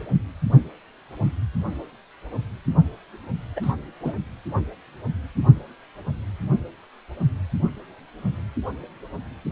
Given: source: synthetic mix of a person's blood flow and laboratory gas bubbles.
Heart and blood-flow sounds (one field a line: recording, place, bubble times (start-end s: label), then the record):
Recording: Doppler ultrasound of blood flow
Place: precordium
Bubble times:
3.56-3.73 s: bubbles
4.04-4.13 s: bubbles
From the record:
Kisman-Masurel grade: 213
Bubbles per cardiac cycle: several, 3 to 8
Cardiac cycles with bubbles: 1 to 10%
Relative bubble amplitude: loud (0.450 to 0.775)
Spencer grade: 1 (occasional bubble signal discernible with the cardiac motion signal, with majority of cardiac periods free of bubbles)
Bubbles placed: only in the low amplitude regions of the cardiac cycle